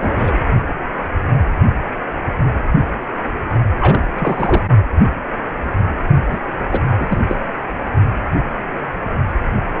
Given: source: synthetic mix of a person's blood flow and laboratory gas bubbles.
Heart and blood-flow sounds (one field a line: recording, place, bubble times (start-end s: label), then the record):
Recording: Doppler ultrasound of blood flow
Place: precordium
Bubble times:
0.01-0.33 s: bubbles
3.80-4.09 s: bubbles
4.18-4.62 s: bubbles
6.31-6.39 s: bubbles
6.68-6.83 s: bubbles
6.97-7.18 s: bubbles
7.29-7.39 s: bubbles
From the record:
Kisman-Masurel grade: 223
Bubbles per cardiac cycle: several, 3 to 8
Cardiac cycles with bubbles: 10 to 50%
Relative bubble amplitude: loud (0.450 to 0.775)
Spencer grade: 2 (many but less than half of the cardiac periods contain bubble signals, singularly or in groups)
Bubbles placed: only in the low amplitude regions of the cardiac cycle